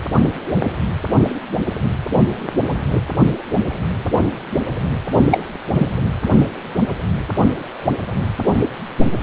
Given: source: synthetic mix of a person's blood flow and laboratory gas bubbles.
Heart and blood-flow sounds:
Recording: Doppler ultrasound of blood flow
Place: precordium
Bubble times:
5.30-5.43 s: bubbles
5.69-5.86 s: bubbles
From the record:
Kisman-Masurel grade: 113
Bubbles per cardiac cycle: 1 to 2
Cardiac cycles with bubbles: 1 to 10%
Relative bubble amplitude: loud (0.450 to 0.775)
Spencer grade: 1 (occasional bubble signal discernible with the cardiac motion signal, with majority of cardiac periods free of bubbles)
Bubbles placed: anywhere in the cardiac cycle

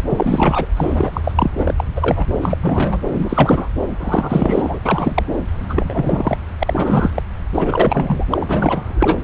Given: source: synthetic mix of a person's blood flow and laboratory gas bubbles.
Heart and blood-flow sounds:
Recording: Doppler ultrasound of blood flow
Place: subclavian vein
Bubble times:
0.09-0.66 s: bubbles
0.77-1.21 s: bubbles
1.24-1.31 s: bubbles
1.35-1.51 s: bubbles
1.58-1.84 s: bubbles
1.96-2.26 s: bubbles
2.38-3.02 s: bubbles
3.08-3.69 s: bubbles
3.99-4.79 s: bubbles
4.85-5.23 s: bubbles
5.69-6.37 s: bubbles
6.60-7.11 s: bubbles
7.15-7.22 s: bubbles
7.54-8.25 s: bubbles
8.30-9.17 s: bubbles
From the record:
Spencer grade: 3 (all of the cardiac periods contain showers or single bubble signals, but not dominating or overriding the cardiac motion signals)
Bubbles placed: anywhere in the cardiac cycle

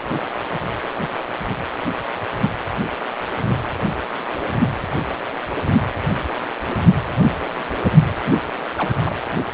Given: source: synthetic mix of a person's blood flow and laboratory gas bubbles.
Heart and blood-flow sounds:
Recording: Doppler ultrasound of blood flow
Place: precordium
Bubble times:
8.77-8.99 s: bubbles
9.03-9.16 s: bubbles
From the record:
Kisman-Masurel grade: 112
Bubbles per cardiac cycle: 1 to 2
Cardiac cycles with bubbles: 1 to 10%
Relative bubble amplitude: moderate (0.250 to 0.450)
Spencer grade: 1 (occasional bubble signal discernible with the cardiac motion signal, with majority of cardiac periods free of bubbles)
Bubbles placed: anywhere in the cardiac cycle

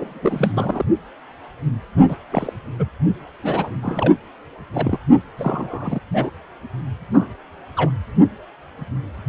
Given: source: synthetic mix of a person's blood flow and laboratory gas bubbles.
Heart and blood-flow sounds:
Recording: Doppler ultrasound of blood flow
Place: precordium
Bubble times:
0.00-0.85 s: bubbles
2.08-2.17 s: bubbles
2.30-2.53 s: bubbles
2.72-2.88 s: bubbles
3.42-3.71 s: bubbles
3.82-4.15 s: bubbles
4.74-4.99 s: bubbles
5.38-6.00 s: bubbles
6.13-6.30 s: bubbles
7.13-7.33 s: bubbles
7.77-7.91 s: bubbles
From the record:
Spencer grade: 3 (all of the cardiac periods contain showers or single bubble signals, but not dominating or overriding the cardiac motion signals)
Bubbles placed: only in the low amplitude regions of the cardiac cycle

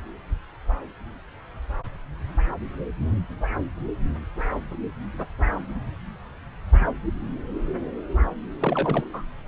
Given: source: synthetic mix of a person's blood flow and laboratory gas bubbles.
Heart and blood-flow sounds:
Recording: Doppler ultrasound of blood flow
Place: subclavian vein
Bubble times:
8.60-9.04 s: bubbles
9.13-9.22 s: bubbles
From the record:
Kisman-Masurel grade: 211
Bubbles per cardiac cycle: several, 3 to 8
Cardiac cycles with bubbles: 1 to 10%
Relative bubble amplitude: barely perceptible (0.100 to 0.250)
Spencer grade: 1 (occasional bubble signal discernible with the cardiac motion signal, with majority of cardiac periods free of bubbles)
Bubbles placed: anywhere in the cardiac cycle

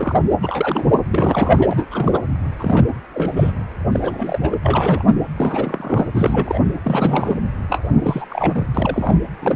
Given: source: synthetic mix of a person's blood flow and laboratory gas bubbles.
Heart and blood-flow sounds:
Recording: Doppler ultrasound of blood flow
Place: precordium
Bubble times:
0.00-0.19 s: bubbles
0.41-0.86 s: bubbles
1.11-1.68 s: bubbles
1.71-1.86 s: bubbles
1.91-2.19 s: bubbles
2.59-2.85 s: bubbles
3.14-3.31 s: bubbles
3.36-3.52 s: bubbles
3.92-4.38 s: bubbles
4.41-4.58 s: bubbles
4.63-5.03 s: bubbles
5.36-6.07 s: bubbles
6.14-6.60 s: bubbles
6.84-7.37 s: bubbles
7.69-8.26 s: bubbles
8.29-8.67 s: bubbles
8.75-9.18 s: bubbles
9.40-9.56 s: bubbles
From the record:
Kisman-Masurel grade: 342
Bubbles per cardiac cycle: rolling drumbeat, 9 or more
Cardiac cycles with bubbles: 100%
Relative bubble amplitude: moderate (0.250 to 0.450)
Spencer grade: 3 (all of the cardiac periods contain showers or single bubble signals, but not dominating or overriding the cardiac motion signals)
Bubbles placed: anywhere in the cardiac cycle

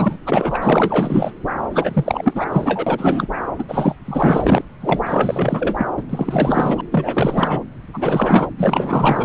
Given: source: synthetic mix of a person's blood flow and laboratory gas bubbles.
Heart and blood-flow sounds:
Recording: Doppler ultrasound of blood flow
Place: subclavian vein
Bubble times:
0.00-0.18 s: bubbles
0.26-0.58 s: bubbles
0.61-1.35 s: bubbles
1.71-2.46 s: bubbles
2.52-3.27 s: bubbles
3.58-3.64 s: bubbles
3.68-3.95 s: bubbles
4.05-4.62 s: bubbles
4.80-5.03 s: bubbles
5.06-5.76 s: bubbles
5.78-5.87 s: bubbles
5.96-6.03 s: bubbles
6.09-6.81 s: bubbles
6.91-7.64 s: bubbles
7.93-8.47 s: bubbles
8.57-9.24 s: bubbles
From the record:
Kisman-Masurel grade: 444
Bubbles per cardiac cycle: continuous sound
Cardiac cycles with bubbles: 100%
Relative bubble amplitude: maximal (0.775 to 0.999)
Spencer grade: 4 (maximum detectable bubble signal sounding continuously throughout systole and diastole of every cardiac period, and overriding the amplitude of the normal cardiac signals)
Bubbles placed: anywhere in the cardiac cycle

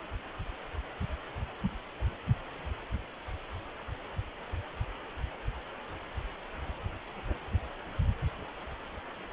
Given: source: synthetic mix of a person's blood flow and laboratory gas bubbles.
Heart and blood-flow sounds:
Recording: Doppler ultrasound of blood flow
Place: precordium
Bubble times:
no bubbles
From the record:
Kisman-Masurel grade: 000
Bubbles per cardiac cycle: 0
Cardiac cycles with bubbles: 0%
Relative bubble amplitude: no bubbles discernible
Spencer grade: 0 (complete lack of bubble signals)

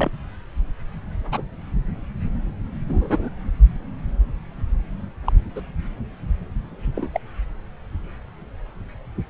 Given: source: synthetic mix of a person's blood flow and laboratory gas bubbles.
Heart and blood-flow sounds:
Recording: Doppler ultrasound of blood flow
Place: subclavian vein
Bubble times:
0.00-0.10 s: bubbles
1.32-1.42 s: bubbles
2.88-3.29 s: bubbles
5.24-5.32 s: bubbles
5.55-5.61 s: bubbles
6.96-7.09 s: bubbles
7.13-7.20 s: bubbles
From the record:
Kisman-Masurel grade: 122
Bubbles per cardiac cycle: 1 to 2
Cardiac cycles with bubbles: 10 to 50%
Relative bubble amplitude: moderate (0.250 to 0.450)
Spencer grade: 2 (many but less than half of the cardiac periods contain bubble signals, singularly or in groups)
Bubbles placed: anywhere in the cardiac cycle

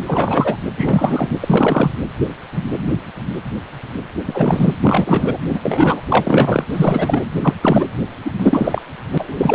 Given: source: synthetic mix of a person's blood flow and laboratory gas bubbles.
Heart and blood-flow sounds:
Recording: Doppler ultrasound of blood flow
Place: precordium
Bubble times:
0.06-0.56 s: bubbles
0.76-1.30 s: bubbles
1.41-1.92 s: bubbles
4.27-4.74 s: bubbles
4.83-5.37 s: bubbles
5.49-5.59 s: bubbles
5.63-6.01 s: bubbles
6.09-6.64 s: bubbles
6.69-7.24 s: bubbles
7.42-7.54 s: bubbles
7.62-7.86 s: bubbles
8.24-8.33 s: bubbles
8.39-8.82 s: bubbles
9.13-9.55 s: bubbles
From the record:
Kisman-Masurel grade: 333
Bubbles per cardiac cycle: rolling drumbeat, 9 or more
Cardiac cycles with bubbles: 50 to 99%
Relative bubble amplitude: loud (0.450 to 0.775)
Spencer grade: 3 (all of the cardiac periods contain showers or single bubble signals, but not dominating or overriding the cardiac motion signals)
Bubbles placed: anywhere in the cardiac cycle

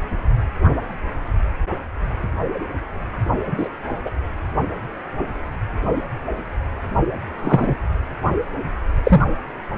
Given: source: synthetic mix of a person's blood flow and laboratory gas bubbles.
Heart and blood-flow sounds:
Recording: Doppler ultrasound of blood flow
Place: precordium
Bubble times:
3.57-3.69 s: bubbles
4.05-4.10 s: bubbles
7.43-7.75 s: bubbles
9.04-9.22 s: bubbles
From the record:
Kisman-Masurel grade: 123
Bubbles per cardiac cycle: 1 to 2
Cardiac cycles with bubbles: 10 to 50%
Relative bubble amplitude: loud (0.450 to 0.775)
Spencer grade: 2 (many but less than half of the cardiac periods contain bubble signals, singularly or in groups)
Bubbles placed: only in the low amplitude regions of the cardiac cycle

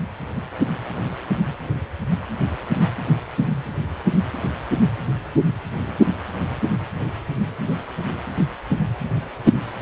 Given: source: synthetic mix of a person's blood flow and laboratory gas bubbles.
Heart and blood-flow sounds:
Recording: Doppler ultrasound of blood flow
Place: precordium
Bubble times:
no bubbles
From the record:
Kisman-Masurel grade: 000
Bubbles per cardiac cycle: 0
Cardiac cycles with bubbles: 0%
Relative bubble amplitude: no bubbles discernible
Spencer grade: 0 (complete lack of bubble signals)

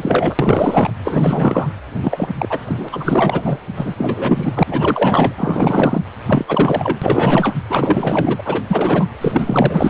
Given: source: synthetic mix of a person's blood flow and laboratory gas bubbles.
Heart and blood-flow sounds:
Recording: Doppler ultrasound of blood flow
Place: precordium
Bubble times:
0.00-0.35 s: bubbles
0.39-0.91 s: bubbles
1.04-1.68 s: bubbles
2.03-2.29 s: bubbles
2.38-2.59 s: bubbles
2.66-2.89 s: bubbles
2.92-3.59 s: bubbles
3.77-3.95 s: bubbles
3.98-4.63 s: bubbles
4.68-5.33 s: bubbles
5.37-6.02 s: bubbles
6.27-6.45 s: bubbles
6.48-6.98 s: bubbles
7.02-7.54 s: bubbles
7.70-8.41 s: bubbles
8.45-8.62 s: bubbles
8.67-9.06 s: bubbles
9.21-9.89 s: bubbles
From the record:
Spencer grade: 4 (maximum detectable bubble signal sounding continuously throughout systole and diastole of every cardiac period, and overriding the amplitude of the normal cardiac signals)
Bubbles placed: anywhere in the cardiac cycle

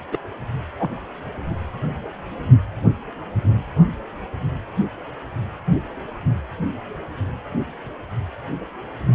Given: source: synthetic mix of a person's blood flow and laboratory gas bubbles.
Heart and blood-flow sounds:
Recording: Doppler ultrasound of blood flow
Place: precordium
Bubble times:
0.12-0.17 s: bubbles
0.79-0.90 s: bubbles
From the record:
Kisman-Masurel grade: 122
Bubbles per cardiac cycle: 1 to 2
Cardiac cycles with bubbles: 10 to 50%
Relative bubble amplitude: moderate (0.250 to 0.450)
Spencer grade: 2 (many but less than half of the cardiac periods contain bubble signals, singularly or in groups)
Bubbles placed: anywhere in the cardiac cycle

